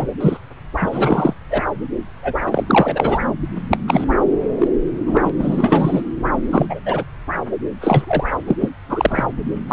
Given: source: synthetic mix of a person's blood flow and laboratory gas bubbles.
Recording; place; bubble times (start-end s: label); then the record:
Doppler ultrasound of blood flow; subclavian vein
0.00-0.06 s: bubbles
0.20-0.37 s: bubbles
0.81-1.33 s: bubbles
1.50-1.63 s: bubbles
2.23-2.35 s: bubbles
2.46-2.64 s: bubbles
2.67-3.19 s: bubbles
3.71-3.77 s: bubbles
3.88-4.04 s: bubbles
4.58-4.68 s: bubbles
5.06-5.30 s: bubbles
5.39-6.01 s: bubbles
6.49-6.66 s: bubbles
6.69-6.80 s: bubbles
6.85-7.04 s: bubbles
7.81-8.24 s: bubbles
8.46-8.56 s: bubbles
8.59-8.70 s: bubbles
8.88-9.23 s: bubbles
9.68-9.73 s: bubbles
From the record:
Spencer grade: 3 (all of the cardiac periods contain showers or single bubble signals, but not dominating or overriding the cardiac motion signals); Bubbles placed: anywhere in the cardiac cycle